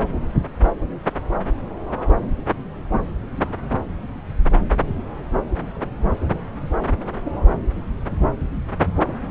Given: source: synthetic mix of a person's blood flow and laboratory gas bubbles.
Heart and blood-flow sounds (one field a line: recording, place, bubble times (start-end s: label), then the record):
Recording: Doppler ultrasound of blood flow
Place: subclavian vein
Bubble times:
9.05-9.17 s: bubbles
9.22-9.26 s: bubbles
From the record:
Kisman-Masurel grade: 111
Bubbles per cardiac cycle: 1 to 2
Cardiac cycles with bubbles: 1 to 10%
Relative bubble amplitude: barely perceptible (0.100 to 0.250)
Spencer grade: 1 (occasional bubble signal discernible with the cardiac motion signal, with majority of cardiac periods free of bubbles)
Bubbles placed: anywhere in the cardiac cycle